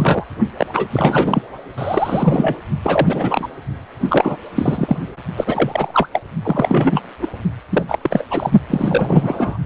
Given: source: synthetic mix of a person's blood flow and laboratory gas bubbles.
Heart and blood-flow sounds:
Doppler ultrasound of blood flow; precordium
0.00-0.27 s: bubbles
0.57-0.67 s: bubbles
0.75-0.87 s: bubbles
0.91-1.42 s: bubbles
1.78-2.56 s: bubbles
2.84-3.48 s: bubbles
4.00-4.37 s: bubbles
4.55-4.96 s: bubbles
5.36-6.09 s: bubbles
6.12-6.19 s: bubbles
6.43-7.02 s: bubbles
7.20-7.28 s: bubbles
7.69-7.84 s: bubbles
7.86-7.99 s: bubbles
8.02-8.24 s: bubbles
8.30-8.50 s: bubbles
8.70-9.58 s: bubbles
From the record:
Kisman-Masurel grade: 343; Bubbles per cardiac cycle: rolling drumbeat, 9 or more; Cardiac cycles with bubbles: 100%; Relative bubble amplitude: loud (0.450 to 0.775); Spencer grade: 3 (all of the cardiac periods contain showers or single bubble signals, but not dominating or overriding the cardiac motion signals); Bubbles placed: only in the low amplitude regions of the cardiac cycle

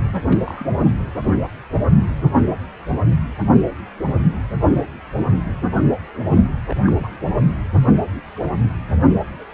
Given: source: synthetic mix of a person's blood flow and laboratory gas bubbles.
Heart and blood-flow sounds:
Doppler ultrasound of blood flow; precordium
0.12-0.21 s: bubbles
0.27-0.39 s: bubbles
0.45-0.89 s: bubbles
0.92-0.99 s: bubbles
6.70-6.75 s: bubbles
6.88-6.92 s: bubbles
6.99-7.20 s: bubbles
From the record:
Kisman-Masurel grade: 221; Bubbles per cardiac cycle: several, 3 to 8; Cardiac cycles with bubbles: 10 to 50%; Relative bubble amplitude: barely perceptible (0.100 to 0.250); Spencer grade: 2 (many but less than half of the cardiac periods contain bubble signals, singularly or in groups); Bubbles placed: anywhere in the cardiac cycle

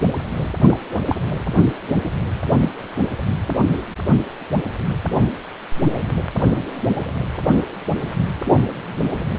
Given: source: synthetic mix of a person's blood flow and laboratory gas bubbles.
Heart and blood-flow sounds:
Doppler ultrasound of blood flow; precordium
0.66-0.80 s: bubbles
1.07-1.15 s: bubbles
2.60-2.70 s: bubbles
From the record:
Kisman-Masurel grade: 122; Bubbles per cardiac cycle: 1 to 2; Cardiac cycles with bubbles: 10 to 50%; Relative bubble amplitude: moderate (0.250 to 0.450); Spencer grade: 2 (many but less than half of the cardiac periods contain bubble signals, singularly or in groups); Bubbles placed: anywhere in the cardiac cycle

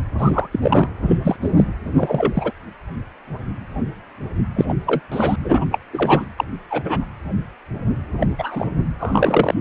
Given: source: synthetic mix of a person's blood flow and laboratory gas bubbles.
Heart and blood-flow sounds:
Doppler ultrasound of blood flow; precordium
0.18-0.48 s: bubbles
0.53-0.59 s: bubbles
0.61-0.89 s: bubbles
1.07-1.18 s: bubbles
1.24-1.36 s: bubbles
1.41-1.50 s: bubbles
1.57-1.64 s: bubbles
1.95-2.52 s: bubbles
4.55-4.74 s: bubbles
4.86-5.01 s: bubbles
5.11-5.36 s: bubbles
5.44-5.65 s: bubbles
5.71-5.79 s: bubbles
5.93-6.25 s: bubbles
6.38-6.44 s: bubbles
6.70-7.04 s: bubbles
8.21-8.27 s: bubbles
8.38-8.68 s: bubbles
9.00-9.54 s: bubbles
From the record:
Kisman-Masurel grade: 233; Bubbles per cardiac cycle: several, 3 to 8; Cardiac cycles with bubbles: 50 to 99%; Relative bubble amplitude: loud (0.450 to 0.775); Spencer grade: 3 (all of the cardiac periods contain showers or single bubble signals, but not dominating or overriding the cardiac motion signals); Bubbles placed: anywhere in the cardiac cycle

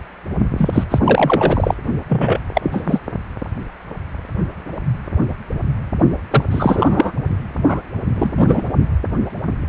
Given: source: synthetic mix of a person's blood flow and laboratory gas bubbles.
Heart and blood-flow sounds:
Doppler ultrasound of blood flow; precordium
0.57-0.69 s: bubbles
0.73-0.84 s: bubbles
0.90-0.99 s: bubbles
1.04-1.75 s: bubbles
2.08-2.40 s: bubbles
2.54-2.99 s: bubbles
6.31-6.44 s: bubbles
6.51-7.12 s: bubbles
7.49-7.82 s: bubbles
8.15-8.64 s: bubbles
From the record:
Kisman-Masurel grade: 223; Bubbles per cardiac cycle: several, 3 to 8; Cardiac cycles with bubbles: 10 to 50%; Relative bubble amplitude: loud (0.450 to 0.775); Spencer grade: 2 (many but less than half of the cardiac periods contain bubble signals, singularly or in groups); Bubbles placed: only in the low amplitude regions of the cardiac cycle

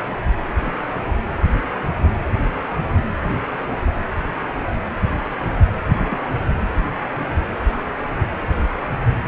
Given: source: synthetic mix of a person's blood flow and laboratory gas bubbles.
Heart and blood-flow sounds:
Doppler ultrasound of blood flow; precordium
5.96-6.04 s: bubbles
6.09-6.18 s: bubbles
From the record:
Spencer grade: 1 (occasional bubble signal discernible with the cardiac motion signal, with majority of cardiac periods free of bubbles); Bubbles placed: anywhere in the cardiac cycle

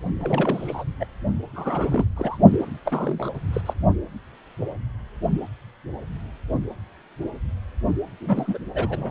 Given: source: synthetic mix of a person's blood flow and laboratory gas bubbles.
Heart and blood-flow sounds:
Doppler ultrasound of blood flow; precordium
0.20-0.84 s: bubbles
1.00-1.05 s: bubbles
1.55-2.05 s: bubbles
2.16-2.38 s: bubbles
2.85-3.29 s: bubbles
3.52-3.61 s: bubbles
3.66-3.74 s: bubbles
8.21-8.59 s: bubbles
8.74-9.11 s: bubbles
From the record:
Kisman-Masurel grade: 232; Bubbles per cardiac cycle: several, 3 to 8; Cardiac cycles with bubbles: 50 to 99%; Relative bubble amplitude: moderate (0.250 to 0.450); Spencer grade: 3 (all of the cardiac periods contain showers or single bubble signals, but not dominating or overriding the cardiac motion signals); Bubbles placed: only in the low amplitude regions of the cardiac cycle

